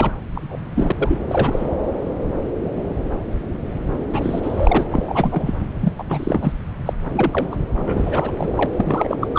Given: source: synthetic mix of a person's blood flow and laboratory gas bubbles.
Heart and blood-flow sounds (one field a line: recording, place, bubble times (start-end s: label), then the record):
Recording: Doppler ultrasound of blood flow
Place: subclavian vein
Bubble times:
0.00-0.12 s: bubbles
0.34-0.57 s: bubbles
0.75-0.92 s: bubbles
0.96-1.20 s: bubbles
1.27-1.71 s: bubbles
4.12-4.86 s: bubbles
4.91-5.54 s: bubbles
5.80-5.92 s: bubbles
5.98-6.04 s: bubbles
6.09-6.52 s: bubbles
6.85-6.93 s: bubbles
7.05-7.11 s: bubbles
7.13-7.56 s: bubbles
7.75-8.66 s: bubbles
8.77-9.17 s: bubbles
9.21-9.28 s: bubbles
9.34-9.39 s: bubbles
From the record:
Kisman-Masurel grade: 333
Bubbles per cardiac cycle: rolling drumbeat, 9 or more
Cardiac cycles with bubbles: 50 to 99%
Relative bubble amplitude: loud (0.450 to 0.775)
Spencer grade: 3 (all of the cardiac periods contain showers or single bubble signals, but not dominating or overriding the cardiac motion signals)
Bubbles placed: anywhere in the cardiac cycle